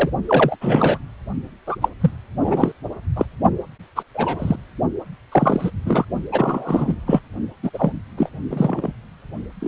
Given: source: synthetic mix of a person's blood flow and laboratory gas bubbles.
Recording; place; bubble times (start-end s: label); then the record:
Doppler ultrasound of blood flow; precordium
0.00-0.10 s: bubbles
0.28-0.56 s: bubbles
0.61-0.98 s: bubbles
1.67-1.76 s: bubbles
1.81-1.89 s: bubbles
2.00-2.11 s: bubbles
2.42-2.72 s: bubbles
3.16-3.25 s: bubbles
3.96-4.03 s: bubbles
4.14-4.56 s: bubbles
5.32-5.71 s: bubbles
5.86-6.05 s: bubbles
6.32-6.95 s: bubbles
7.07-7.21 s: bubbles
7.62-7.70 s: bubbles
7.74-7.92 s: bubbles
8.17-8.29 s: bubbles
8.50-8.92 s: bubbles
9.61-9.68 s: bubbles
From the record:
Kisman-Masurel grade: 243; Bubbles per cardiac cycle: several, 3 to 8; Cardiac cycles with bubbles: 100%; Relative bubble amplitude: loud (0.450 to 0.775); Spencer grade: 3 (all of the cardiac periods contain showers or single bubble signals, but not dominating or overriding the cardiac motion signals); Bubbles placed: only in the low amplitude regions of the cardiac cycle